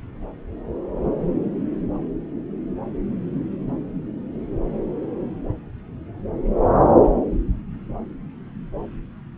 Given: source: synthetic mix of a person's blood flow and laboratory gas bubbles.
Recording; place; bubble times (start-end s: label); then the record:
Doppler ultrasound of blood flow; subclavian vein
no bubbles
From the record:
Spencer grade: 0 (complete lack of bubble signals)